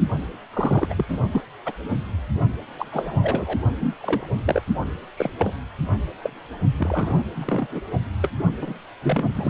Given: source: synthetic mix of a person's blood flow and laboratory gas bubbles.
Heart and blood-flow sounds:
Doppler ultrasound of blood flow; precordium
0.00-0.05 s: bubbles
0.53-0.93 s: bubbles
0.96-1.05 s: bubbles
1.09-1.17 s: bubbles
1.31-1.42 s: bubbles
1.65-1.72 s: bubbles
2.78-2.85 s: bubbles
2.92-3.58 s: bubbles
3.79-3.94 s: bubbles
4.00-4.27 s: bubbles
4.46-4.61 s: bubbles
5.17-5.30 s: bubbles
5.38-5.53 s: bubbles
6.23-6.30 s: bubbles
6.78-7.23 s: bubbles
7.36-7.67 s: bubbles
7.71-7.80 s: bubbles
8.22-8.29 s: bubbles
8.61-8.73 s: bubbles
9.02-9.50 s: bubbles
From the record:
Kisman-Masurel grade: 242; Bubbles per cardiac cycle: several, 3 to 8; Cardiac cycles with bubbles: 100%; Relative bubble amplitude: moderate (0.250 to 0.450); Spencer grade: 3 (all of the cardiac periods contain showers or single bubble signals, but not dominating or overriding the cardiac motion signals); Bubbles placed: only in the low amplitude regions of the cardiac cycle

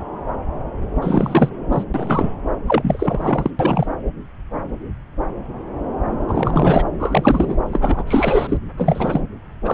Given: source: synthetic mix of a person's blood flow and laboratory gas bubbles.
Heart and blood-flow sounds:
Doppler ultrasound of blood flow; subclavian vein
1.02-1.49 s: bubbles
1.71-1.84 s: bubbles
1.94-2.31 s: bubbles
2.67-3.51 s: bubbles
3.59-3.93 s: bubbles
6.28-6.84 s: bubbles
6.99-7.57 s: bubbles
7.71-8.04 s: bubbles
8.07-8.58 s: bubbles
8.77-9.21 s: bubbles
9.64-9.74 s: bubbles
From the record:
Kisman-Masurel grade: 333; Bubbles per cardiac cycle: rolling drumbeat, 9 or more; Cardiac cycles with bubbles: 50 to 99%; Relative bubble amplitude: loud (0.450 to 0.775); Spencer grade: 3 (all of the cardiac periods contain showers or single bubble signals, but not dominating or overriding the cardiac motion signals); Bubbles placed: anywhere in the cardiac cycle

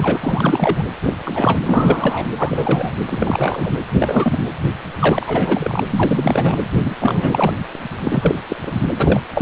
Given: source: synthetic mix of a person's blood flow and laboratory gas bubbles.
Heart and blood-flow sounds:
Doppler ultrasound of blood flow; precordium
0.00-0.86 s: bubbles
1.03-1.12 s: bubbles
1.24-1.59 s: bubbles
1.66-2.27 s: bubbles
2.38-2.90 s: bubbles
3.10-3.71 s: bubbles
3.99-4.38 s: bubbles
4.42-4.47 s: bubbles
4.99-5.83 s: bubbles
5.88-6.57 s: bubbles
6.84-6.95 s: bubbles
7.00-7.54 s: bubbles
8.04-8.39 s: bubbles
8.49-8.56 s: bubbles
8.66-8.71 s: bubbles
8.97-9.20 s: bubbles
9.33-9.42 s: bubbles
From the record:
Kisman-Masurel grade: 342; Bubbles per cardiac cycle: rolling drumbeat, 9 or more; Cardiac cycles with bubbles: 100%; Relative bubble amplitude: moderate (0.250 to 0.450); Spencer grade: 3 (all of the cardiac periods contain showers or single bubble signals, but not dominating or overriding the cardiac motion signals); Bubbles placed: anywhere in the cardiac cycle

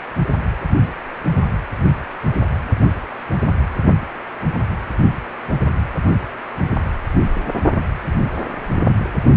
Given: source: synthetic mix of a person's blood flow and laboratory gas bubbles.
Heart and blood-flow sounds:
Doppler ultrasound of blood flow; precordium
no bubbles
From the record:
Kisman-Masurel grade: 000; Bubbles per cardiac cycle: 0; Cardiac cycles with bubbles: 0%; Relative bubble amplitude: no bubbles discernible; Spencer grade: 0 (complete lack of bubble signals)

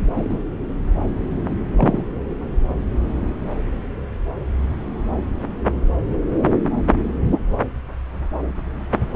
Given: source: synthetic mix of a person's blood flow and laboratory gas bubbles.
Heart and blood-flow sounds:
Doppler ultrasound of blood flow; subclavian vein
0.15-0.42 s: bubbles
1.76-2.02 s: bubbles
From the record:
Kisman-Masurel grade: 122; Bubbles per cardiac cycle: 1 to 2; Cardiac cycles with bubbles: 10 to 50%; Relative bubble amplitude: moderate (0.250 to 0.450); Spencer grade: 2 (many but less than half of the cardiac periods contain bubble signals, singularly or in groups); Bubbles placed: anywhere in the cardiac cycle

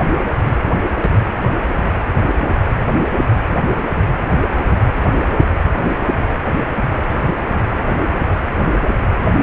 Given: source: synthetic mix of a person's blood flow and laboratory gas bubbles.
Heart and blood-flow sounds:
Doppler ultrasound of blood flow; precordium
0.98-1.09 s: bubbles
1.27-1.63 s: bubbles
From the record:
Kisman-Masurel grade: 111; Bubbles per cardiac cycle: 1 to 2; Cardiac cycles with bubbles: 1 to 10%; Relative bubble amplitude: barely perceptible (0.100 to 0.250); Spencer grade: 1 (occasional bubble signal discernible with the cardiac motion signal, with majority of cardiac periods free of bubbles); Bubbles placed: anywhere in the cardiac cycle

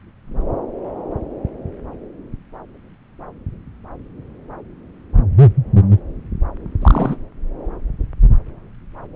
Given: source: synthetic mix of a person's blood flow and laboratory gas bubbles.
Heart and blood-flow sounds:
Doppler ultrasound of blood flow; subclavian vein
6.82-7.16 s: bubbles
From the record:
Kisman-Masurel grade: 123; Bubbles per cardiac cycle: 1 to 2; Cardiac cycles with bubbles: 10 to 50%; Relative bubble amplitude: loud (0.450 to 0.775); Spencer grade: 2 (many but less than half of the cardiac periods contain bubble signals, singularly or in groups); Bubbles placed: anywhere in the cardiac cycle

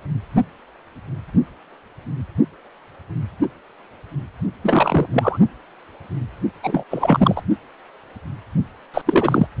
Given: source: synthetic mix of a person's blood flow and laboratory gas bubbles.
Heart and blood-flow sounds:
Doppler ultrasound of blood flow; precordium
4.62-5.06 s: bubbles
5.12-5.38 s: bubbles
6.62-6.83 s: bubbles
6.90-7.42 s: bubbles
8.94-9.02 s: bubbles
9.06-9.47 s: bubbles
From the record:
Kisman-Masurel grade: 223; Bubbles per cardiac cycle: several, 3 to 8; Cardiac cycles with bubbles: 10 to 50%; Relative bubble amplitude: loud (0.450 to 0.775); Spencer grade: 2 (many but less than half of the cardiac periods contain bubble signals, singularly or in groups); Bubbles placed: only in the low amplitude regions of the cardiac cycle

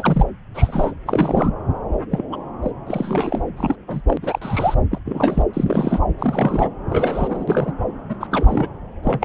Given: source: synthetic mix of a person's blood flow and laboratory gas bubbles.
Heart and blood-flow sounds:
Doppler ultrasound of blood flow; subclavian vein
0.00-0.25 s: bubbles
0.54-0.94 s: bubbles
1.06-1.51 s: bubbles
2.10-2.23 s: bubbles
2.32-2.37 s: bubbles
2.62-2.71 s: bubbles
2.87-3.43 s: bubbles
3.56-3.76 s: bubbles
3.88-4.01 s: bubbles
4.07-4.17 s: bubbles
4.22-4.75 s: bubbles
4.91-4.99 s: bubbles
5.05-5.43 s: bubbles
5.53-6.00 s: bubbles
6.19-6.69 s: bubbles
6.90-7.73 s: bubbles
8.09-8.15 s: bubbles
8.20-8.27 s: bubbles
8.31-8.68 s: bubbles
9.03-9.25 s: bubbles
From the record:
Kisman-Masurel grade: 242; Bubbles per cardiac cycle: several, 3 to 8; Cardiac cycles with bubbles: 100%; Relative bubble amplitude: moderate (0.250 to 0.450); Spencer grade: 3 (all of the cardiac periods contain showers or single bubble signals, but not dominating or overriding the cardiac motion signals); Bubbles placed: anywhere in the cardiac cycle

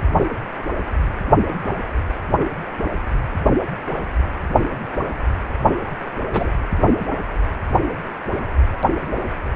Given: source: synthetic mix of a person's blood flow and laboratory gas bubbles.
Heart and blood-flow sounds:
Doppler ultrasound of blood flow; precordium
6.33-6.50 s: bubbles
From the record:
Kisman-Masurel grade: 113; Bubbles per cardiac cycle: 1 to 2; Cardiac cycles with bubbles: 1 to 10%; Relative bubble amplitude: loud (0.450 to 0.775); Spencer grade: 1 (occasional bubble signal discernible with the cardiac motion signal, with majority of cardiac periods free of bubbles); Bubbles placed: anywhere in the cardiac cycle

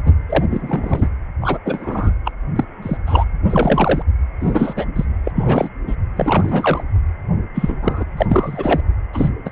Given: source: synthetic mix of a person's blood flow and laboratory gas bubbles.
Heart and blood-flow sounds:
Doppler ultrasound of blood flow; precordium
0.05-0.13 s: bubbles
0.29-0.44 s: bubbles
0.51-1.08 s: bubbles
1.41-1.58 s: bubbles
1.66-2.12 s: bubbles
2.25-2.31 s: bubbles
2.56-2.64 s: bubbles
2.82-2.97 s: bubbles
3.06-3.24 s: bubbles
3.50-4.02 s: bubbles
4.40-4.87 s: bubbles
4.96-5.05 s: bubbles
5.25-5.32 s: bubbles
5.35-5.69 s: bubbles
5.87-5.96 s: bubbles
6.16-6.83 s: bubbles
7.54-7.78 s: bubbles
7.82-8.04 s: bubbles
8.17-8.26 s: bubbles
8.28-8.80 s: bubbles
9.13-9.29 s: bubbles
9.45-9.49 s: bubbles
From the record:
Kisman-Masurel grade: 243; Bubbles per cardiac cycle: several, 3 to 8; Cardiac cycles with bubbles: 100%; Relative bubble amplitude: loud (0.450 to 0.775); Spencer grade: 3 (all of the cardiac periods contain showers or single bubble signals, but not dominating or overriding the cardiac motion signals); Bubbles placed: anywhere in the cardiac cycle

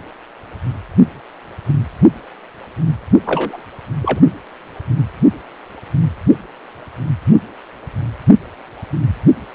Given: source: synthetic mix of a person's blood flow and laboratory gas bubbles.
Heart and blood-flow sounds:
Doppler ultrasound of blood flow; precordium
3.25-3.63 s: bubbles
4.01-4.21 s: bubbles
From the record:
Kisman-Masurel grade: 113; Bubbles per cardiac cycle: 1 to 2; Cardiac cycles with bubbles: 1 to 10%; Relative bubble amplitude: loud (0.450 to 0.775); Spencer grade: 1 (occasional bubble signal discernible with the cardiac motion signal, with majority of cardiac periods free of bubbles); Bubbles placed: only in the low amplitude regions of the cardiac cycle

